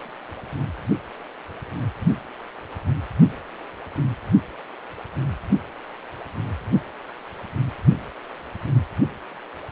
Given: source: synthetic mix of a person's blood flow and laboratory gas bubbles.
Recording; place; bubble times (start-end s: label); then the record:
Doppler ultrasound of blood flow; precordium
no bubbles
From the record:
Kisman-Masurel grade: 000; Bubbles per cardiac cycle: 0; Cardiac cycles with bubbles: 0%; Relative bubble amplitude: no bubbles discernible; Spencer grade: 0 (complete lack of bubble signals)